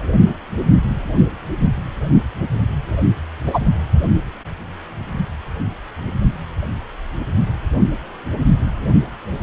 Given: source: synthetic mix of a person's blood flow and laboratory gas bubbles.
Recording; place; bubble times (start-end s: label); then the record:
Doppler ultrasound of blood flow; precordium
3.45-3.59 s: bubbles
From the record:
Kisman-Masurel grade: 113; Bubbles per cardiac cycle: 1 to 2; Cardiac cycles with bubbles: 1 to 10%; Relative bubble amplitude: loud (0.450 to 0.775); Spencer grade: 1 (occasional bubble signal discernible with the cardiac motion signal, with majority of cardiac periods free of bubbles); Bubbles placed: anywhere in the cardiac cycle